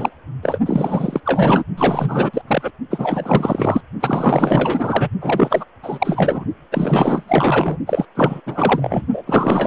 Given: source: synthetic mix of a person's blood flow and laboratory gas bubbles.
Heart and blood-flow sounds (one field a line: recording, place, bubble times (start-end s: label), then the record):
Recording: Doppler ultrasound of blood flow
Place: precordium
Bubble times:
0.00-0.10 s: bubbles
0.42-0.59 s: bubbles
0.66-1.21 s: bubbles
1.25-1.64 s: bubbles
1.77-2.42 s: bubbles
2.47-2.71 s: bubbles
2.90-3.81 s: bubbles
4.00-5.09 s: bubbles
5.21-5.64 s: bubbles
5.82-6.44 s: bubbles
6.71-7.78 s: bubbles
7.86-8.05 s: bubbles
8.15-8.41 s: bubbles
8.46-9.06 s: bubbles
9.12-9.24 s: bubbles
9.27-9.67 s: bubbles
From the record:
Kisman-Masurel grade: 444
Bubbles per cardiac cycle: continuous sound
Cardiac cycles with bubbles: 100%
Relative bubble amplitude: maximal (0.775 to 0.999)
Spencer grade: 4 (maximum detectable bubble signal sounding continuously throughout systole and diastole of every cardiac period, and overriding the amplitude of the normal cardiac signals)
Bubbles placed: only in the low amplitude regions of the cardiac cycle